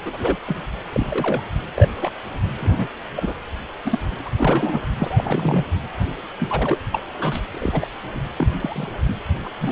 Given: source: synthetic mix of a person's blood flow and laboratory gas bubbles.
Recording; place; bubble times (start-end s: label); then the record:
Doppler ultrasound of blood flow; precordium
0.05-0.37 s: bubbles
0.47-0.62 s: bubbles
0.93-1.43 s: bubbles
1.74-1.89 s: bubbles
1.96-2.12 s: bubbles
2.57-2.88 s: bubbles
3.16-3.34 s: bubbles
3.85-4.22 s: bubbles
4.25-4.29 s: bubbles
4.38-4.82 s: bubbles
4.98-5.64 s: bubbles
6.39-6.78 s: bubbles
6.92-7.05 s: bubbles
7.17-7.40 s: bubbles
7.51-7.87 s: bubbles
8.15-8.21 s: bubbles
8.38-8.90 s: bubbles
9.04-9.16 s: bubbles
9.20-9.24 s: bubbles
9.45-9.49 s: bubbles
9.61-9.72 s: bubbles
From the record:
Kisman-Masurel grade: 242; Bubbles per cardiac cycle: several, 3 to 8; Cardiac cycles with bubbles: 100%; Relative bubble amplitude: moderate (0.250 to 0.450); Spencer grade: 3 (all of the cardiac periods contain showers or single bubble signals, but not dominating or overriding the cardiac motion signals); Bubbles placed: anywhere in the cardiac cycle